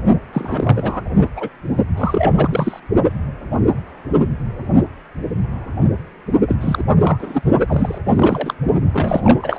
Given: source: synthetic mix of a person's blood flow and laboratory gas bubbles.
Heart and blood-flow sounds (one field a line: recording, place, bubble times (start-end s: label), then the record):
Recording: Doppler ultrasound of blood flow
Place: precordium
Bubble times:
0.33-1.01 s: bubbles
1.18-1.28 s: bubbles
1.35-1.48 s: bubbles
1.97-2.80 s: bubbles
6.47-6.55 s: bubbles
6.60-6.84 s: bubbles
7.00-7.42 s: bubbles
7.68-7.99 s: bubbles
8.09-8.54 s: bubbles
8.93-9.58 s: bubbles
From the record:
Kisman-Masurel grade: 332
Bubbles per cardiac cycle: rolling drumbeat, 9 or more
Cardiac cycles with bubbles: 50 to 99%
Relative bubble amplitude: moderate (0.250 to 0.450)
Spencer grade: 3 (all of the cardiac periods contain showers or single bubble signals, but not dominating or overriding the cardiac motion signals)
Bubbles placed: only in the low amplitude regions of the cardiac cycle